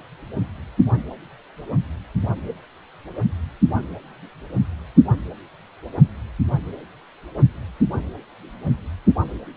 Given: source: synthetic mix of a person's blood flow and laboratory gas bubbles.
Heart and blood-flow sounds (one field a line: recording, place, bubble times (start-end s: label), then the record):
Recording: Doppler ultrasound of blood flow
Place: precordium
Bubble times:
no bubbles
From the record:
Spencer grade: 0 (complete lack of bubble signals)